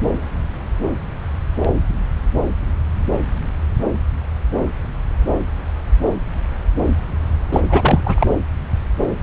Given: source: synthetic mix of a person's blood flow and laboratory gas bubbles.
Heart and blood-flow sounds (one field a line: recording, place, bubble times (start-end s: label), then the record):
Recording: Doppler ultrasound of blood flow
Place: subclavian vein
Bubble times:
7.52-7.61 s: bubbles
7.69-8.26 s: bubbles
From the record:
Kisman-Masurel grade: 213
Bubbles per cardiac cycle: several, 3 to 8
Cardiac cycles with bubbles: 1 to 10%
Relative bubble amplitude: loud (0.450 to 0.775)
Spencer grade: 1 (occasional bubble signal discernible with the cardiac motion signal, with majority of cardiac periods free of bubbles)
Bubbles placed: anywhere in the cardiac cycle